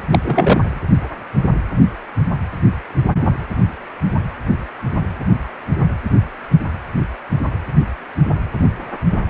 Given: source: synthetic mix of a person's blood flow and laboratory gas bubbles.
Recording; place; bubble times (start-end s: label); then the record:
Doppler ultrasound of blood flow; precordium
0.12-0.19 s: bubbles
0.24-0.82 s: bubbles
From the record:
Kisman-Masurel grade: 213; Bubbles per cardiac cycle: several, 3 to 8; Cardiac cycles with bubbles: 1 to 10%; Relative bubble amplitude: loud (0.450 to 0.775); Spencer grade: 1 (occasional bubble signal discernible with the cardiac motion signal, with majority of cardiac periods free of bubbles); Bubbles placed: anywhere in the cardiac cycle